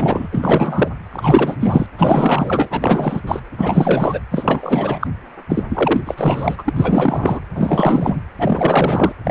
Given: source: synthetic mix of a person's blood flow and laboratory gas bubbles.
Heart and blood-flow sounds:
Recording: Doppler ultrasound of blood flow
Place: precordium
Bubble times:
0.00-0.28 s: bubbles
0.32-0.89 s: bubbles
1.10-1.56 s: bubbles
1.60-1.86 s: bubbles
1.98-3.21 s: bubbles
3.27-3.40 s: bubbles
3.57-4.20 s: bubbles
4.31-5.07 s: bubbles
5.49-5.63 s: bubbles
5.69-6.01 s: bubbles
6.05-6.73 s: bubbles
6.76-7.40 s: bubbles
7.54-8.21 s: bubbles
8.38-9.13 s: bubbles
9.24-9.31 s: bubbles
From the record:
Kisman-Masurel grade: 444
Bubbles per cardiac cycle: continuous sound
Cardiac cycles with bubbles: 100%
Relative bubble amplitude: maximal (0.775 to 0.999)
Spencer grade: 4 (maximum detectable bubble signal sounding continuously throughout systole and diastole of every cardiac period, and overriding the amplitude of the normal cardiac signals)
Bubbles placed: anywhere in the cardiac cycle

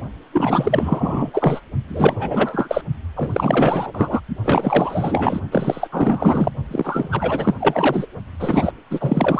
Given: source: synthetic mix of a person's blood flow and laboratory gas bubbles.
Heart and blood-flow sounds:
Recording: Doppler ultrasound of blood flow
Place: precordium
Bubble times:
0.32-1.31 s: bubbles
1.33-1.60 s: bubbles
1.88-2.81 s: bubbles
3.15-4.21 s: bubbles
4.43-5.41 s: bubbles
5.52-5.89 s: bubbles
5.92-6.50 s: bubbles
6.71-7.54 s: bubbles
7.59-8.06 s: bubbles
8.39-8.73 s: bubbles
8.90-9.40 s: bubbles
From the record:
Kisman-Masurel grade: 444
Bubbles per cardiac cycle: continuous sound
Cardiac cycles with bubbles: 100%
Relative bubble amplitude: maximal (0.775 to 0.999)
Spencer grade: 4 (maximum detectable bubble signal sounding continuously throughout systole and diastole of every cardiac period, and overriding the amplitude of the normal cardiac signals)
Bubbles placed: only in the low amplitude regions of the cardiac cycle

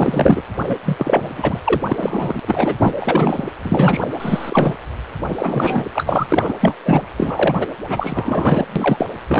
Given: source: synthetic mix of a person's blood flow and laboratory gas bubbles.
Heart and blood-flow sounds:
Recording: Doppler ultrasound of blood flow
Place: precordium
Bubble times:
0.00-0.42 s: bubbles
0.69-0.75 s: bubbles
0.85-1.59 s: bubbles
1.64-1.81 s: bubbles
1.89-2.75 s: bubbles
2.78-2.94 s: bubbles
2.99-3.50 s: bubbles
3.63-4.08 s: bubbles
4.20-4.77 s: bubbles
5.28-5.86 s: bubbles
5.93-6.54 s: bubbles
6.61-6.75 s: bubbles
6.85-7.02 s: bubbles
7.16-7.66 s: bubbles
7.88-8.65 s: bubbles
8.76-9.06 s: bubbles
9.28-9.40 s: bubbles
From the record:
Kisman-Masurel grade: 343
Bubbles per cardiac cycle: rolling drumbeat, 9 or more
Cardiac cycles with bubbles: 100%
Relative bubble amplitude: loud (0.450 to 0.775)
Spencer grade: 3 (all of the cardiac periods contain showers or single bubble signals, but not dominating or overriding the cardiac motion signals)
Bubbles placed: anywhere in the cardiac cycle

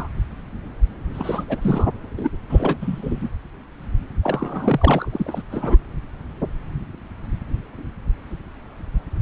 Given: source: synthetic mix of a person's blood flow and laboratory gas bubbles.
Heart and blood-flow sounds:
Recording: Doppler ultrasound of blood flow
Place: subclavian vein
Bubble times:
0.00-0.08 s: bubbles
1.14-1.44 s: bubbles
1.48-1.90 s: bubbles
2.17-2.31 s: bubbles
2.49-3.29 s: bubbles
4.23-5.43 s: bubbles
5.51-5.78 s: bubbles
From the record:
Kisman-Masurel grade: 332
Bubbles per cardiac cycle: rolling drumbeat, 9 or more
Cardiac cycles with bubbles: 50 to 99%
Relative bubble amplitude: moderate (0.250 to 0.450)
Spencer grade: 3 (all of the cardiac periods contain showers or single bubble signals, but not dominating or overriding the cardiac motion signals)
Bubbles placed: anywhere in the cardiac cycle

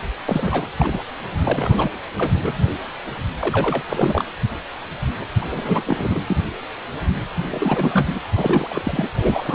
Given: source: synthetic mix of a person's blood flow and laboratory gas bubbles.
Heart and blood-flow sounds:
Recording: Doppler ultrasound of blood flow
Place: precordium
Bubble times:
0.25-0.67 s: bubbles
0.80-1.04 s: bubbles
1.44-1.92 s: bubbles
2.16-2.65 s: bubbles
3.38-3.82 s: bubbles
3.89-4.25 s: bubbles
5.41-5.45 s: bubbles
5.51-5.83 s: bubbles
5.86-6.20 s: bubbles
6.27-6.37 s: bubbles
7.50-8.20 s: bubbles
8.31-9.09 s: bubbles
9.13-9.55 s: bubbles
From the record:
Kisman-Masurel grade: 332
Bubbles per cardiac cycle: rolling drumbeat, 9 or more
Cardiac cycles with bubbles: 50 to 99%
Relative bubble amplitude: moderate (0.250 to 0.450)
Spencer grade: 3 (all of the cardiac periods contain showers or single bubble signals, but not dominating or overriding the cardiac motion signals)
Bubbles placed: anywhere in the cardiac cycle

